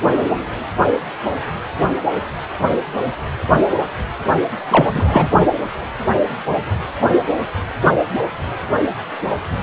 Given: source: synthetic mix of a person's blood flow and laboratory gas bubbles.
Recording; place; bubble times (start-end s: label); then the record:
Doppler ultrasound of blood flow; precordium
4.68-5.29 s: bubbles
From the record:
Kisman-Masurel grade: 213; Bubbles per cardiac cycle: several, 3 to 8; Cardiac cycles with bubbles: 1 to 10%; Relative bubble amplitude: loud (0.450 to 0.775); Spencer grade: 1 (occasional bubble signal discernible with the cardiac motion signal, with majority of cardiac periods free of bubbles); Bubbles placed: anywhere in the cardiac cycle